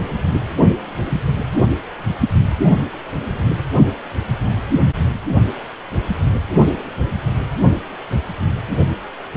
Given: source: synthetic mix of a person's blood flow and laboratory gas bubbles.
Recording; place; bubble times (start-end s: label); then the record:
Doppler ultrasound of blood flow; precordium
no bubbles
From the record:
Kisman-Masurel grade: 000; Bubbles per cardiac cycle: 0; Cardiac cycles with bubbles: 0%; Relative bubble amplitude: no bubbles discernible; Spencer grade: 0 (complete lack of bubble signals)